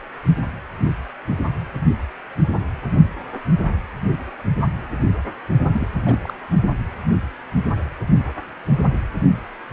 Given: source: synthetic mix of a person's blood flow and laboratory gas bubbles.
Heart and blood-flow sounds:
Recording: Doppler ultrasound of blood flow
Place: precordium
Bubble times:
5.73-5.88 s: bubbles
6.05-6.33 s: bubbles
From the record:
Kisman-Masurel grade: 211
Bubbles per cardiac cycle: several, 3 to 8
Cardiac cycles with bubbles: 1 to 10%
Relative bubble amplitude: barely perceptible (0.100 to 0.250)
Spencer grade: 1 (occasional bubble signal discernible with the cardiac motion signal, with majority of cardiac periods free of bubbles)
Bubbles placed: only in the low amplitude regions of the cardiac cycle

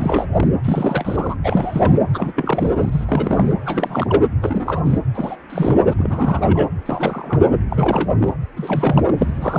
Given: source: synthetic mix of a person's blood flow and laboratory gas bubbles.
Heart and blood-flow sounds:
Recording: Doppler ultrasound of blood flow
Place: precordium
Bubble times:
0.00-0.26 s: bubbles
0.34-0.47 s: bubbles
0.64-1.35 s: bubbles
1.44-2.00 s: bubbles
2.13-2.32 s: bubbles
2.36-3.05 s: bubbles
3.08-3.55 s: bubbles
3.65-4.22 s: bubbles
4.40-4.80 s: bubbles
4.84-4.98 s: bubbles
5.14-5.36 s: bubbles
5.50-5.75 s: bubbles
5.85-5.93 s: bubbles
5.97-6.69 s: bubbles
6.85-7.41 s: bubbles
7.70-8.09 s: bubbles
8.19-8.33 s: bubbles
8.56-9.14 s: bubbles
9.17-9.59 s: bubbles
From the record:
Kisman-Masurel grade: 342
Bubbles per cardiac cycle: rolling drumbeat, 9 or more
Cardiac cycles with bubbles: 100%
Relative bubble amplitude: moderate (0.250 to 0.450)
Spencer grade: 3 (all of the cardiac periods contain showers or single bubble signals, but not dominating or overriding the cardiac motion signals)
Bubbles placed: anywhere in the cardiac cycle

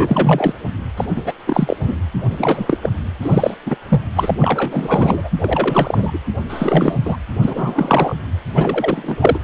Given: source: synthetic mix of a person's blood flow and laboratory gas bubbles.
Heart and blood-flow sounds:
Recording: Doppler ultrasound of blood flow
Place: precordium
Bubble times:
0.00-0.54 s: bubbles
0.96-1.06 s: bubbles
1.16-1.23 s: bubbles
1.25-1.32 s: bubbles
1.46-1.76 s: bubbles
1.84-1.97 s: bubbles
2.29-2.79 s: bubbles
2.82-2.90 s: bubbles
3.21-3.54 s: bubbles
3.66-3.75 s: bubbles
3.88-4.00 s: bubbles
4.15-4.31 s: bubbles
4.39-5.29 s: bubbles
5.39-6.18 s: bubbles
6.49-6.97 s: bubbles
7.04-7.16 s: bubbles
7.42-8.16 s: bubbles
8.54-9.16 s: bubbles
9.21-9.39 s: bubbles
From the record:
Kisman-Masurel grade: 343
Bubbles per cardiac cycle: rolling drumbeat, 9 or more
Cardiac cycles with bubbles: 100%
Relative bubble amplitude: loud (0.450 to 0.775)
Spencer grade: 3 (all of the cardiac periods contain showers or single bubble signals, but not dominating or overriding the cardiac motion signals)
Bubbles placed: anywhere in the cardiac cycle

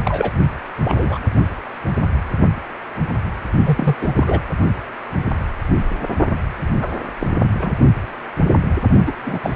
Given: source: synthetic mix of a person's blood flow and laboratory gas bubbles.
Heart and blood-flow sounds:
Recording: Doppler ultrasound of blood flow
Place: precordium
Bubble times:
0.05-0.31 s: bubbles
0.83-1.18 s: bubbles
3.65-3.96 s: bubbles
4.01-4.13 s: bubbles
4.17-4.42 s: bubbles
6.81-6.88 s: bubbles
7.19-7.26 s: bubbles
7.61-7.71 s: bubbles
9.06-9.12 s: bubbles
9.25-9.39 s: bubbles
9.42-9.56 s: bubbles
From the record:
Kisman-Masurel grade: 232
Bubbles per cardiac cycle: several, 3 to 8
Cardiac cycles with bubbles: 50 to 99%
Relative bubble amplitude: moderate (0.250 to 0.450)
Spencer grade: 3 (all of the cardiac periods contain showers or single bubble signals, but not dominating or overriding the cardiac motion signals)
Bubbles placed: only in the low amplitude regions of the cardiac cycle

